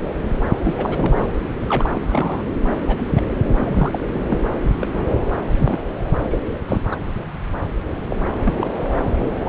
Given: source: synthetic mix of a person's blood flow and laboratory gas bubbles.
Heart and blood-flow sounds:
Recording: Doppler ultrasound of blood flow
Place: subclavian vein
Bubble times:
0.63-1.27 s: bubbles
1.69-1.88 s: bubbles
1.94-2.42 s: bubbles
2.68-2.82 s: bubbles
2.87-3.21 s: bubbles
3.60-3.99 s: bubbles
4.12-4.39 s: bubbles
4.79-4.88 s: bubbles
4.93-5.18 s: bubbles
5.58-5.81 s: bubbles
6.29-6.41 s: bubbles
6.68-6.81 s: bubbles
6.91-6.97 s: bubbles
8.09-8.16 s: bubbles
8.44-8.67 s: bubbles
8.74-9.01 s: bubbles
9.04-9.29 s: bubbles
9.43-9.49 s: bubbles
From the record:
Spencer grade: 3 (all of the cardiac periods contain showers or single bubble signals, but not dominating or overriding the cardiac motion signals)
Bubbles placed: anywhere in the cardiac cycle

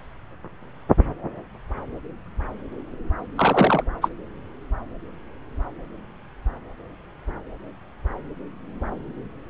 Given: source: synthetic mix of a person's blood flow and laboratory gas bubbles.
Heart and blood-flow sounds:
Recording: Doppler ultrasound of blood flow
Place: subclavian vein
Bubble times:
3.36-3.83 s: bubbles
4.01-4.09 s: bubbles
From the record:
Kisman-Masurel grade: 212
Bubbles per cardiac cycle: several, 3 to 8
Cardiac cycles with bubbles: 1 to 10%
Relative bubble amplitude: moderate (0.250 to 0.450)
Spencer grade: 1 (occasional bubble signal discernible with the cardiac motion signal, with majority of cardiac periods free of bubbles)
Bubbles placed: anywhere in the cardiac cycle

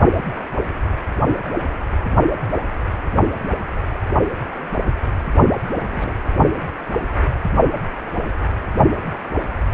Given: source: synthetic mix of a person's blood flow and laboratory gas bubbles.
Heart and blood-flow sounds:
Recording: Doppler ultrasound of blood flow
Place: precordium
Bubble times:
5.73-6.12 s: bubbles
From the record:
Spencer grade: 1 (occasional bubble signal discernible with the cardiac motion signal, with majority of cardiac periods free of bubbles)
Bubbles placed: only in the low amplitude regions of the cardiac cycle

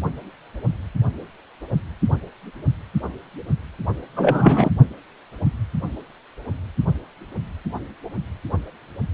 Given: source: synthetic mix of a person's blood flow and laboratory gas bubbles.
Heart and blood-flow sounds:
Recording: Doppler ultrasound of blood flow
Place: precordium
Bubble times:
4.16-4.71 s: bubbles
From the record:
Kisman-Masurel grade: 213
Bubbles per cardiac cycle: several, 3 to 8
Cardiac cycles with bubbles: 1 to 10%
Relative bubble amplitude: loud (0.450 to 0.775)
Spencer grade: 1 (occasional bubble signal discernible with the cardiac motion signal, with majority of cardiac periods free of bubbles)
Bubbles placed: only in the low amplitude regions of the cardiac cycle

